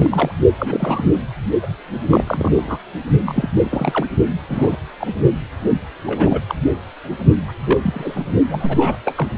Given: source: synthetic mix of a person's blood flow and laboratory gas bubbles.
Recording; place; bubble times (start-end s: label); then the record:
Doppler ultrasound of blood flow; precordium
0.00-0.33 s: bubbles
0.57-1.19 s: bubbles
1.62-1.67 s: bubbles
2.10-2.24 s: bubbles
2.27-2.78 s: bubbles
3.25-3.50 s: bubbles
3.62-4.07 s: bubbles
4.49-4.76 s: bubbles
5.00-5.13 s: bubbles
6.06-6.42 s: bubbles
6.47-6.55 s: bubbles
7.04-7.16 s: bubbles
7.48-7.51 s: bubbles
7.64-8.25 s: bubbles
8.50-8.97 s: bubbles
9.05-9.28 s: bubbles
From the record:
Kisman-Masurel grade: 242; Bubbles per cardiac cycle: several, 3 to 8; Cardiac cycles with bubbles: 100%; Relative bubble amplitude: moderate (0.250 to 0.450); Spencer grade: 3 (all of the cardiac periods contain showers or single bubble signals, but not dominating or overriding the cardiac motion signals); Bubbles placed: only in the low amplitude regions of the cardiac cycle